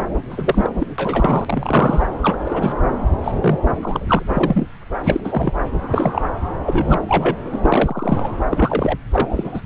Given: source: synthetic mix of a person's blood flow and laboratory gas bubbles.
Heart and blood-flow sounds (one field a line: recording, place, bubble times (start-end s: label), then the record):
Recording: Doppler ultrasound of blood flow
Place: subclavian vein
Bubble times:
0.30-0.69 s: bubbles
0.78-0.86 s: bubbles
0.98-2.11 s: bubbles
2.22-2.37 s: bubbles
2.45-2.73 s: bubbles
3.24-3.59 s: bubbles
3.83-4.23 s: bubbles
4.32-4.67 s: bubbles
5.04-5.21 s: bubbles
5.24-5.53 s: bubbles
5.88-6.22 s: bubbles
6.65-7.01 s: bubbles
7.08-7.36 s: bubbles
7.52-7.58 s: bubbles
7.62-8.30 s: bubbles
8.50-8.98 s: bubbles
9.12-9.61 s: bubbles
From the record:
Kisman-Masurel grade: 243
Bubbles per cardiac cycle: several, 3 to 8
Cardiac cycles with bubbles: 100%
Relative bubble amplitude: loud (0.450 to 0.775)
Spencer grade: 3 (all of the cardiac periods contain showers or single bubble signals, but not dominating or overriding the cardiac motion signals)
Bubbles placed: anywhere in the cardiac cycle